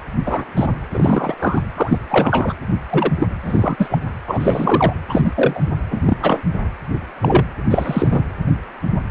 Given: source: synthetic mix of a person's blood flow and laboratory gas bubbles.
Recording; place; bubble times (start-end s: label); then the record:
Doppler ultrasound of blood flow; precordium
0.25-0.45 s: bubbles
0.56-0.69 s: bubbles
0.94-1.34 s: bubbles
1.37-1.62 s: bubbles
1.76-1.99 s: bubbles
2.09-2.53 s: bubbles
2.90-3.12 s: bubbles
3.19-3.26 s: bubbles
3.42-3.76 s: bubbles
3.78-3.98 s: bubbles
4.27-4.93 s: bubbles
5.08-5.61 s: bubbles
5.91-6.43 s: bubbles
7.22-7.45 s: bubbles
7.70-8.24 s: bubbles
From the record:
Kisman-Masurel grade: 233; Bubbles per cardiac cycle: several, 3 to 8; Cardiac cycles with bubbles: 50 to 99%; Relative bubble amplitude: loud (0.450 to 0.775); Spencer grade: 3 (all of the cardiac periods contain showers or single bubble signals, but not dominating or overriding the cardiac motion signals); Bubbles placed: anywhere in the cardiac cycle